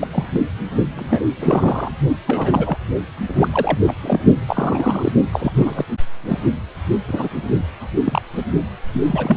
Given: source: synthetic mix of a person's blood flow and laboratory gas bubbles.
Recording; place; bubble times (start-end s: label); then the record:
Doppler ultrasound of blood flow; precordium
0.01-0.07 s: bubbles
0.11-0.27 s: bubbles
0.31-0.41 s: bubbles
0.95-1.21 s: bubbles
1.39-1.92 s: bubbles
2.27-2.77 s: bubbles
3.25-3.48 s: bubbles
3.53-3.78 s: bubbles
3.87-3.94 s: bubbles
4.03-4.19 s: bubbles
4.48-5.12 s: bubbles
5.33-5.85 s: bubbles
6.26-6.41 s: bubbles
7.08-7.29 s: bubbles
7.35-7.43 s: bubbles
7.95-8.21 s: bubbles
8.37-8.43 s: bubbles
8.94-9.01 s: bubbles
9.03-9.36 s: bubbles
From the record:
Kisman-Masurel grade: 242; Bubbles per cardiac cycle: several, 3 to 8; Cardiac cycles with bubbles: 100%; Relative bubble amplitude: moderate (0.250 to 0.450); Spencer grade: 3 (all of the cardiac periods contain showers or single bubble signals, but not dominating or overriding the cardiac motion signals); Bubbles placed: only in the low amplitude regions of the cardiac cycle